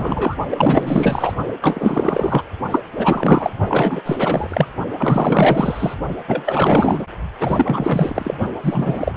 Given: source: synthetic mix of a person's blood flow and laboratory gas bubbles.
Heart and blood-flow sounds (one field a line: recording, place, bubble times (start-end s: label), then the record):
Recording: Doppler ultrasound of blood flow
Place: precordium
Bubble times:
0.00-0.36 s: bubbles
0.51-1.35 s: bubbles
1.61-2.42 s: bubbles
2.71-2.82 s: bubbles
2.95-3.53 s: bubbles
3.67-4.02 s: bubbles
4.06-4.67 s: bubbles
4.98-5.95 s: bubbles
6.27-7.06 s: bubbles
7.40-8.34 s: bubbles
8.63-9.17 s: bubbles
From the record:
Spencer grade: 4 (maximum detectable bubble signal sounding continuously throughout systole and diastole of every cardiac period, and overriding the amplitude of the normal cardiac signals)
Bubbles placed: only in the low amplitude regions of the cardiac cycle